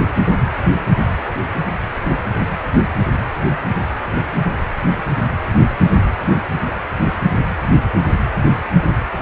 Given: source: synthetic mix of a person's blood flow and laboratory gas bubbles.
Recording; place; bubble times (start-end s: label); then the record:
Doppler ultrasound of blood flow; precordium
4.19-4.22 s: bubbles
4.33-4.42 s: bubbles
From the record:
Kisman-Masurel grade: 111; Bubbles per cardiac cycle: 1 to 2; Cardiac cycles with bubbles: 1 to 10%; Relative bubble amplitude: barely perceptible (0.100 to 0.250); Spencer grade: 1 (occasional bubble signal discernible with the cardiac motion signal, with majority of cardiac periods free of bubbles); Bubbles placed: anywhere in the cardiac cycle